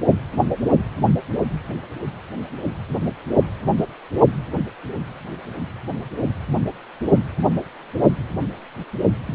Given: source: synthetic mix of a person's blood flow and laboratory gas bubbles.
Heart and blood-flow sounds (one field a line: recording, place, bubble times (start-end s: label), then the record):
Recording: Doppler ultrasound of blood flow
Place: precordium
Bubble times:
9.26-9.34 s: bubbles
From the record:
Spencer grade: 1 (occasional bubble signal discernible with the cardiac motion signal, with majority of cardiac periods free of bubbles)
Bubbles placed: only in the low amplitude regions of the cardiac cycle